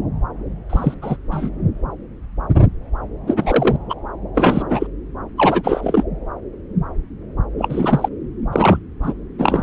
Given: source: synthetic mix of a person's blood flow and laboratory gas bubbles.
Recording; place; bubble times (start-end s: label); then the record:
Doppler ultrasound of blood flow; subclavian vein
0.69-0.95 s: bubbles
1.01-1.17 s: bubbles
1.31-1.50 s: bubbles
3.27-3.76 s: bubbles
3.89-3.94 s: bubbles
4.34-4.87 s: bubbles
5.37-6.04 s: bubbles
7.58-8.09 s: bubbles
8.52-8.79 s: bubbles
9.03-9.13 s: bubbles
9.38-9.63 s: bubbles
From the record:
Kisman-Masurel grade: 233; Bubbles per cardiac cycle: several, 3 to 8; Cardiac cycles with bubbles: 50 to 99%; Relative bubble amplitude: loud (0.450 to 0.775); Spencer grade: 3 (all of the cardiac periods contain showers or single bubble signals, but not dominating or overriding the cardiac motion signals); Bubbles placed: anywhere in the cardiac cycle